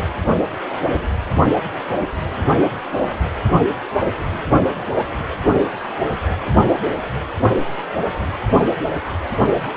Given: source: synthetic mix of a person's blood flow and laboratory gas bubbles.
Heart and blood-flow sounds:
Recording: Doppler ultrasound of blood flow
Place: precordium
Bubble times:
no bubbles
From the record:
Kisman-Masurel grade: 000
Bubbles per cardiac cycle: 0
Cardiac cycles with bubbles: 0%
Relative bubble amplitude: no bubbles discernible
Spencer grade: 0 (complete lack of bubble signals)

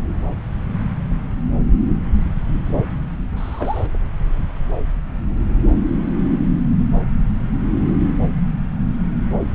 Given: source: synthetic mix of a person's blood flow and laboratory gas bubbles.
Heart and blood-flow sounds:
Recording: Doppler ultrasound of blood flow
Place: subclavian vein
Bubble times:
3.37-3.86 s: bubbles
From the record:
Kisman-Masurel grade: 111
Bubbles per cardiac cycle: 1 to 2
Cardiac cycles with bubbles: 1 to 10%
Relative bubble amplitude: barely perceptible (0.100 to 0.250)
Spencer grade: 1 (occasional bubble signal discernible with the cardiac motion signal, with majority of cardiac periods free of bubbles)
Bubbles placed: anywhere in the cardiac cycle

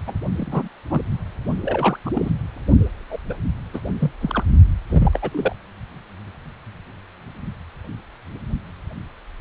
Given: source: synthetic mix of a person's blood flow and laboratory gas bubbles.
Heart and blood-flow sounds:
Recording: Doppler ultrasound of blood flow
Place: precordium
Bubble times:
0.07-0.13 s: bubbles
0.38-0.69 s: bubbles
0.90-1.01 s: bubbles
1.65-1.98 s: bubbles
2.05-2.10 s: bubbles
2.13-2.30 s: bubbles
3.10-3.19 s: bubbles
3.29-3.34 s: bubbles
3.73-3.81 s: bubbles
3.88-3.93 s: bubbles
3.99-4.10 s: bubbles
4.21-4.43 s: bubbles
4.88-5.19 s: bubbles
5.22-5.55 s: bubbles
From the record:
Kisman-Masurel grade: 222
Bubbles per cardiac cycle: several, 3 to 8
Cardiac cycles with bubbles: 10 to 50%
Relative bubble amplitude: moderate (0.250 to 0.450)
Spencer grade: 2 (many but less than half of the cardiac periods contain bubble signals, singularly or in groups)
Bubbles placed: only in the low amplitude regions of the cardiac cycle

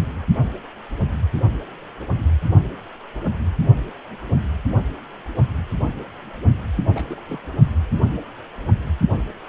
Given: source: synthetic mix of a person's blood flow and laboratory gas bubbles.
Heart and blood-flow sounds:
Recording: Doppler ultrasound of blood flow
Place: precordium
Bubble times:
6.94-7.39 s: bubbles
7.43-7.49 s: bubbles
From the record:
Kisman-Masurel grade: 121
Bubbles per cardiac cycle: 1 to 2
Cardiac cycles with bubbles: 10 to 50%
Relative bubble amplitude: barely perceptible (0.100 to 0.250)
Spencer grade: 2 (many but less than half of the cardiac periods contain bubble signals, singularly or in groups)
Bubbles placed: only in the low amplitude regions of the cardiac cycle

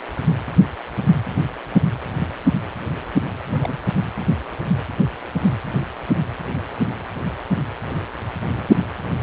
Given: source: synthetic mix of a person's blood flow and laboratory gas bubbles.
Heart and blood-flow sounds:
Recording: Doppler ultrasound of blood flow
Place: precordium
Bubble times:
3.50-3.78 s: bubbles
From the record:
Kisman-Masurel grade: 211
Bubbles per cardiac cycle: several, 3 to 8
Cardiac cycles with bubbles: 1 to 10%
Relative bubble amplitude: barely perceptible (0.100 to 0.250)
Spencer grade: 1 (occasional bubble signal discernible with the cardiac motion signal, with majority of cardiac periods free of bubbles)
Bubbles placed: anywhere in the cardiac cycle

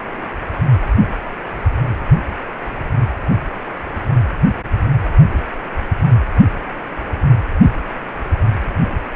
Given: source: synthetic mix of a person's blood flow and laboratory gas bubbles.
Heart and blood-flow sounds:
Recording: Doppler ultrasound of blood flow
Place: precordium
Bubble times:
no bubbles
From the record:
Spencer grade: 0 (complete lack of bubble signals)

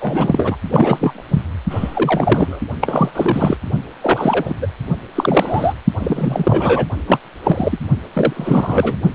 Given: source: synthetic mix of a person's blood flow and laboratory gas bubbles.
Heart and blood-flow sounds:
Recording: Doppler ultrasound of blood flow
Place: precordium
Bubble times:
0.01-0.57 s: bubbles
0.70-1.24 s: bubbles
1.30-1.43 s: bubbles
1.70-2.60 s: bubbles
2.81-3.58 s: bubbles
4.02-4.54 s: bubbles
4.62-4.67 s: bubbles
5.15-5.74 s: bubbles
6.00-6.86 s: bubbles
7.07-7.20 s: bubbles
7.43-7.79 s: bubbles
8.13-8.96 s: bubbles
From the record:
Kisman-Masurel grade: 343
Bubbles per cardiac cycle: rolling drumbeat, 9 or more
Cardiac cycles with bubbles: 100%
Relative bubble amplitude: loud (0.450 to 0.775)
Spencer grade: 3 (all of the cardiac periods contain showers or single bubble signals, but not dominating or overriding the cardiac motion signals)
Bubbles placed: only in the low amplitude regions of the cardiac cycle

